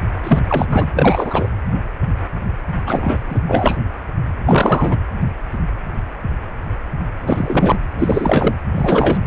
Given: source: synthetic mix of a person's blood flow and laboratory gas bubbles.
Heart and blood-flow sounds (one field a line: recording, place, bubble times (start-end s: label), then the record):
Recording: Doppler ultrasound of blood flow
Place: precordium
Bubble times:
0.23-0.42 s: bubbles
0.48-0.66 s: bubbles
0.69-0.91 s: bubbles
0.95-1.48 s: bubbles
2.86-3.44 s: bubbles
3.46-3.78 s: bubbles
4.46-4.96 s: bubbles
7.23-7.76 s: bubbles
7.98-8.54 s: bubbles
8.75-9.18 s: bubbles
From the record:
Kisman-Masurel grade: 333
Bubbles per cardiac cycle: rolling drumbeat, 9 or more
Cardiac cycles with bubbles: 50 to 99%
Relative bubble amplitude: loud (0.450 to 0.775)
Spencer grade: 3 (all of the cardiac periods contain showers or single bubble signals, but not dominating or overriding the cardiac motion signals)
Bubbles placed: anywhere in the cardiac cycle